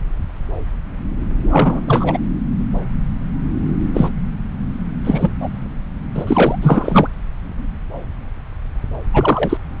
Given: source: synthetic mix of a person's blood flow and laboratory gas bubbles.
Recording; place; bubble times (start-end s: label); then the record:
Doppler ultrasound of blood flow; subclavian vein
1.49-1.80 s: bubbles
1.87-2.19 s: bubbles
3.94-4.11 s: bubbles
5.05-5.32 s: bubbles
5.40-5.50 s: bubbles
6.15-6.59 s: bubbles
6.62-7.08 s: bubbles
9.12-9.58 s: bubbles
From the record:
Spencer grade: 3 (all of the cardiac periods contain showers or single bubble signals, but not dominating or overriding the cardiac motion signals); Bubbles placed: anywhere in the cardiac cycle